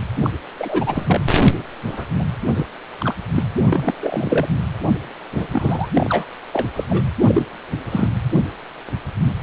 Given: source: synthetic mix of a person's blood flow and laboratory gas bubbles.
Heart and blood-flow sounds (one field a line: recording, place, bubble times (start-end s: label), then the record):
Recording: Doppler ultrasound of blood flow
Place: precordium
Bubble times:
0.16-0.30 s: bubbles
0.59-1.21 s: bubbles
1.86-2.05 s: bubbles
2.19-2.25 s: bubbles
2.54-2.66 s: bubbles
3.00-3.15 s: bubbles
3.35-3.43 s: bubbles
3.72-3.94 s: bubbles
4.00-4.49 s: bubbles
5.32-5.46 s: bubbles
5.52-5.88 s: bubbles
5.92-6.25 s: bubbles
6.53-6.67 s: bubbles
6.75-6.84 s: bubbles
6.89-7.04 s: bubbles
7.28-7.46 s: bubbles
7.91-8.09 s: bubbles
From the record:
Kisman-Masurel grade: 233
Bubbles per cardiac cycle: several, 3 to 8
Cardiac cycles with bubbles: 50 to 99%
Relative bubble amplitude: loud (0.450 to 0.775)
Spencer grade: 3 (all of the cardiac periods contain showers or single bubble signals, but not dominating or overriding the cardiac motion signals)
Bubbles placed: anywhere in the cardiac cycle